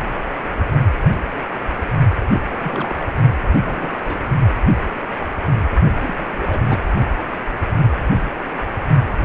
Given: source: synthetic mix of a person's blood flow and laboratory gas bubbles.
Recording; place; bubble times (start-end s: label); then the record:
Doppler ultrasound of blood flow; precordium
2.29-2.42 s: bubbles
2.48-3.08 s: bubbles
3.64-4.26 s: bubbles
6.00-6.25 s: bubbles
6.36-6.61 s: bubbles
6.69-6.80 s: bubbles
From the record:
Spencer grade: 2 (many but less than half of the cardiac periods contain bubble signals, singularly or in groups); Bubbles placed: only in the low amplitude regions of the cardiac cycle